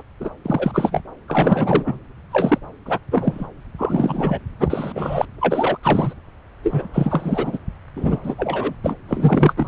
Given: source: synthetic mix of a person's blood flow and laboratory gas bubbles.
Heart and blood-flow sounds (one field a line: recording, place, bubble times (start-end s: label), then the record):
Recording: Doppler ultrasound of blood flow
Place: subclavian vein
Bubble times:
0.00-0.03 s: bubbles
0.20-0.30 s: bubbles
0.45-1.03 s: bubbles
1.27-1.99 s: bubbles
2.31-2.58 s: bubbles
2.85-2.99 s: bubbles
3.11-3.48 s: bubbles
3.78-4.38 s: bubbles
4.59-5.25 s: bubbles
5.40-5.77 s: bubbles
5.83-6.14 s: bubbles
6.63-6.87 s: bubbles
6.93-7.58 s: bubbles
7.96-8.19 s: bubbles
8.23-8.74 s: bubbles
8.83-8.96 s: bubbles
9.08-9.54 s: bubbles
9.57-9.67 s: bubbles
From the record:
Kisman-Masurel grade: 343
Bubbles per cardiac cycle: rolling drumbeat, 9 or more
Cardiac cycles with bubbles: 100%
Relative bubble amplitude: loud (0.450 to 0.775)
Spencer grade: 3 (all of the cardiac periods contain showers or single bubble signals, but not dominating or overriding the cardiac motion signals)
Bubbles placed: anywhere in the cardiac cycle